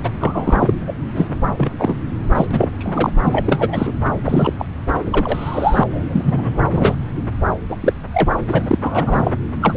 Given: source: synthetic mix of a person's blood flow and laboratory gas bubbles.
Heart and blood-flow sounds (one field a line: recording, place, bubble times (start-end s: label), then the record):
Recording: Doppler ultrasound of blood flow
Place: subclavian vein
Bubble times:
0.03-0.10 s: bubbles
0.20-0.74 s: bubbles
0.86-0.93 s: bubbles
1.15-1.30 s: bubbles
1.58-1.71 s: bubbles
1.79-1.97 s: bubbles
2.34-2.46 s: bubbles
2.50-2.69 s: bubbles
2.78-3.11 s: bubbles
3.23-3.92 s: bubbles
4.25-4.53 s: bubbles
4.58-4.66 s: bubbles
5.06-5.83 s: bubbles
5.89-6.59 s: bubbles
6.72-6.95 s: bubbles
7.69-7.76 s: bubbles
7.81-7.93 s: bubbles
8.12-8.36 s: bubbles
8.48-8.79 s: bubbles
8.81-9.36 s: bubbles
9.61-9.77 s: bubbles
From the record:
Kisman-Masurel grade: 243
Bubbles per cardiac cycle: several, 3 to 8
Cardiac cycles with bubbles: 100%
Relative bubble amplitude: loud (0.450 to 0.775)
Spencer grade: 3 (all of the cardiac periods contain showers or single bubble signals, but not dominating or overriding the cardiac motion signals)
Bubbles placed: anywhere in the cardiac cycle